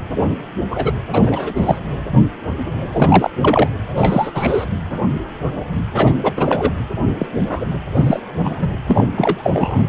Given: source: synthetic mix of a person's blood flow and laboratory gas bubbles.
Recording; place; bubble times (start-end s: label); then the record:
Doppler ultrasound of blood flow; precordium
0.71-0.92 s: bubbles
1.13-1.80 s: bubbles
2.92-3.30 s: bubbles
3.42-3.68 s: bubbles
3.96-4.31 s: bubbles
4.34-4.65 s: bubbles
5.94-6.14 s: bubbles
6.23-6.33 s: bubbles
6.37-6.72 s: bubbles
7.18-7.26 s: bubbles
7.35-7.66 s: bubbles
7.95-8.20 s: bubbles
8.44-8.69 s: bubbles
8.87-9.08 s: bubbles
9.15-9.86 s: bubbles
From the record:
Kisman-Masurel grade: 233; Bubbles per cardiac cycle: several, 3 to 8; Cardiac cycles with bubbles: 50 to 99%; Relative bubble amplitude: loud (0.450 to 0.775); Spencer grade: 3 (all of the cardiac periods contain showers or single bubble signals, but not dominating or overriding the cardiac motion signals); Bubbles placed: anywhere in the cardiac cycle